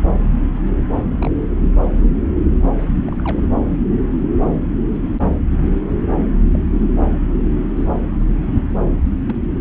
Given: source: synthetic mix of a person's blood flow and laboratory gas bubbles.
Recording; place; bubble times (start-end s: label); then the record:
Doppler ultrasound of blood flow; subclavian vein
1.13-1.41 s: bubbles
3.08-3.15 s: bubbles
3.19-3.48 s: bubbles
6.54-6.59 s: bubbles
6.98-7.18 s: bubbles
7.77-7.86 s: bubbles
8.19-8.25 s: bubbles
9.28-9.34 s: bubbles
From the record:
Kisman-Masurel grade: 121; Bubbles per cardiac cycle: 1 to 2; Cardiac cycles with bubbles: 10 to 50%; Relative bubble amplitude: barely perceptible (0.100 to 0.250); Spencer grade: 2 (many but less than half of the cardiac periods contain bubble signals, singularly or in groups); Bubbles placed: anywhere in the cardiac cycle